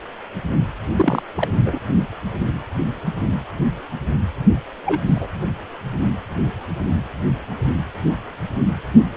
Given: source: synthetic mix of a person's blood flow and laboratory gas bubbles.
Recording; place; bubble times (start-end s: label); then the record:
Doppler ultrasound of blood flow; precordium
0.97-1.23 s: bubbles
1.34-1.49 s: bubbles
1.65-1.79 s: bubbles
4.86-5.01 s: bubbles
5.05-5.28 s: bubbles
From the record:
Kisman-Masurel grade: 222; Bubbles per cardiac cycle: several, 3 to 8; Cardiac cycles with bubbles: 10 to 50%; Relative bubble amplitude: moderate (0.250 to 0.450); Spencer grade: 2 (many but less than half of the cardiac periods contain bubble signals, singularly or in groups); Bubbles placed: anywhere in the cardiac cycle